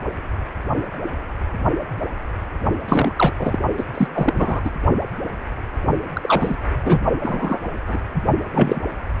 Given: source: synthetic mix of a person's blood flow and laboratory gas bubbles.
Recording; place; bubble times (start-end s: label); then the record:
Doppler ultrasound of blood flow; precordium
2.88-3.12 s: bubbles
3.18-3.31 s: bubbles
3.39-3.58 s: bubbles
3.78-3.84 s: bubbles
3.94-4.08 s: bubbles
4.13-4.34 s: bubbles
4.37-4.61 s: bubbles
4.64-4.70 s: bubbles
6.13-6.57 s: bubbles
6.84-7.00 s: bubbles
7.23-7.59 s: bubbles
7.87-7.99 s: bubbles
8.14-8.22 s: bubbles
8.53-8.81 s: bubbles
From the record:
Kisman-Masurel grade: 233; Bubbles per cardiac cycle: several, 3 to 8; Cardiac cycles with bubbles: 50 to 99%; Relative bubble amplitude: loud (0.450 to 0.775); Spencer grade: 3 (all of the cardiac periods contain showers or single bubble signals, but not dominating or overriding the cardiac motion signals); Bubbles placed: only in the low amplitude regions of the cardiac cycle